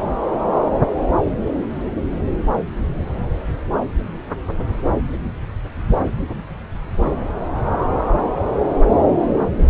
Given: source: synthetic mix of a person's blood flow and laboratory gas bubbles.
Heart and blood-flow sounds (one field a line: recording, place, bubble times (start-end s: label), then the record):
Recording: Doppler ultrasound of blood flow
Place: subclavian vein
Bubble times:
no bubbles
From the record:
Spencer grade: 0 (complete lack of bubble signals)